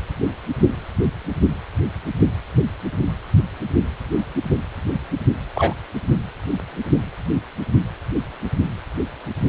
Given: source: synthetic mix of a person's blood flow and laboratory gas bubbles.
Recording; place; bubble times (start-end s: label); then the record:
Doppler ultrasound of blood flow; precordium
5.55-5.74 s: bubbles
From the record:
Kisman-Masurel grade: 113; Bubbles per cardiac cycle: 1 to 2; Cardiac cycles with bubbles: 1 to 10%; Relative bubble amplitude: loud (0.450 to 0.775); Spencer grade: 1 (occasional bubble signal discernible with the cardiac motion signal, with majority of cardiac periods free of bubbles); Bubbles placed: only in the low amplitude regions of the cardiac cycle